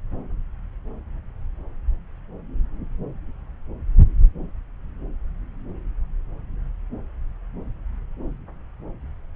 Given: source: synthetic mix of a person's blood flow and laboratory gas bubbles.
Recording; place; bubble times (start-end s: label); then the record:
Doppler ultrasound of blood flow; subclavian vein
no bubbles
From the record:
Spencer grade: 0 (complete lack of bubble signals)